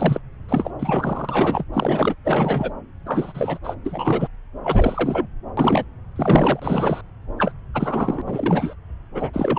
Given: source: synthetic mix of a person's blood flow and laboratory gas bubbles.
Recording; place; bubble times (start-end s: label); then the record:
Doppler ultrasound of blood flow; subclavian vein
0.00-0.20 s: bubbles
0.48-0.70 s: bubbles
0.79-1.65 s: bubbles
1.73-2.14 s: bubbles
2.24-2.72 s: bubbles
3.06-3.58 s: bubbles
3.64-3.75 s: bubbles
3.85-4.27 s: bubbles
4.63-5.28 s: bubbles
5.57-5.85 s: bubbles
6.15-7.01 s: bubbles
7.38-7.51 s: bubbles
7.74-8.21 s: bubbles
8.26-8.75 s: bubbles
9.14-9.30 s: bubbles
9.33-9.59 s: bubbles
From the record:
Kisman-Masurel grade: 343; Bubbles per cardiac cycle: rolling drumbeat, 9 or more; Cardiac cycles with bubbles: 100%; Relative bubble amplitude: loud (0.450 to 0.775); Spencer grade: 3 (all of the cardiac periods contain showers or single bubble signals, but not dominating or overriding the cardiac motion signals); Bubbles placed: anywhere in the cardiac cycle